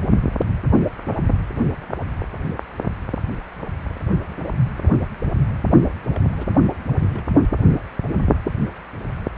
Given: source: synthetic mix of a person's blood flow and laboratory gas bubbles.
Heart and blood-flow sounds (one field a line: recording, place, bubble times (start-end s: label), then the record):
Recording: Doppler ultrasound of blood flow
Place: precordium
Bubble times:
6.14-6.21 s: bubbles
6.38-6.46 s: bubbles
7.08-7.24 s: bubbles
7.58-7.62 s: bubbles
8.03-8.21 s: bubbles
8.44-8.52 s: bubbles
From the record:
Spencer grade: 2 (many but less than half of the cardiac periods contain bubble signals, singularly or in groups)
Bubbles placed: only in the low amplitude regions of the cardiac cycle